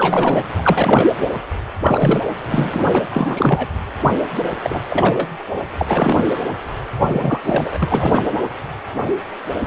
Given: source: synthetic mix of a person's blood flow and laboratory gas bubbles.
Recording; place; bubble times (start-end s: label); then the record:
Doppler ultrasound of blood flow; precordium
0.00-0.48 s: bubbles
0.58-1.07 s: bubbles
1.84-2.20 s: bubbles
2.49-3.02 s: bubbles
3.12-3.68 s: bubbles
4.62-4.82 s: bubbles
4.90-5.29 s: bubbles
5.79-6.29 s: bubbles
7.04-7.41 s: bubbles
7.44-7.78 s: bubbles
7.82-8.22 s: bubbles
From the record:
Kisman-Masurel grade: 332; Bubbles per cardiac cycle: rolling drumbeat, 9 or more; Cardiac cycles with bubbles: 50 to 99%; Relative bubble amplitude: moderate (0.250 to 0.450); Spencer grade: 3 (all of the cardiac periods contain showers or single bubble signals, but not dominating or overriding the cardiac motion signals); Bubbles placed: anywhere in the cardiac cycle